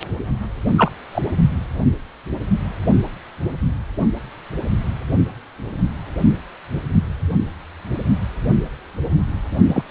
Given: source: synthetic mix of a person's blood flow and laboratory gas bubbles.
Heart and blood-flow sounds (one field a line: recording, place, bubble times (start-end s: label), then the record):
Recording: Doppler ultrasound of blood flow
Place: precordium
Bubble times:
0.77-0.91 s: bubbles
1.12-1.22 s: bubbles
9.68-9.83 s: bubbles
From the record:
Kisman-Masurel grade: 123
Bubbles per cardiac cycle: 1 to 2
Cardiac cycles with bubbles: 10 to 50%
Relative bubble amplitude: loud (0.450 to 0.775)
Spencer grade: 2 (many but less than half of the cardiac periods contain bubble signals, singularly or in groups)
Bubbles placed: only in the low amplitude regions of the cardiac cycle